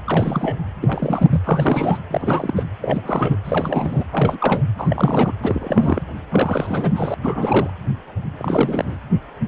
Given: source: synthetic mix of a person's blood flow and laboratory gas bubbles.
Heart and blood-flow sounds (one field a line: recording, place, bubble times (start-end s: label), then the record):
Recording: Doppler ultrasound of blood flow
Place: precordium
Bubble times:
0.05-0.66 s: bubbles
0.82-1.41 s: bubbles
1.44-1.98 s: bubbles
2.10-2.63 s: bubbles
2.81-3.36 s: bubbles
3.44-4.04 s: bubbles
4.12-4.63 s: bubbles
4.78-5.34 s: bubbles
5.41-6.02 s: bubbles
6.29-7.14 s: bubbles
7.22-7.70 s: bubbles
8.38-8.97 s: bubbles
From the record:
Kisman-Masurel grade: 332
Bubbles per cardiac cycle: rolling drumbeat, 9 or more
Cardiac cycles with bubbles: 50 to 99%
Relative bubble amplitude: moderate (0.250 to 0.450)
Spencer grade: 3 (all of the cardiac periods contain showers or single bubble signals, but not dominating or overriding the cardiac motion signals)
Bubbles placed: anywhere in the cardiac cycle